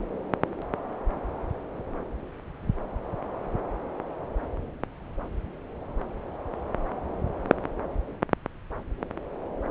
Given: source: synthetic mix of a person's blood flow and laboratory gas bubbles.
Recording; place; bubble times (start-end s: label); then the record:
Doppler ultrasound of blood flow; subclavian vein
no bubbles
From the record:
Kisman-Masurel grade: 000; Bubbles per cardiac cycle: 0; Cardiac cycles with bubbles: 0%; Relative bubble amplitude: no bubbles discernible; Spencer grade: 0 (complete lack of bubble signals)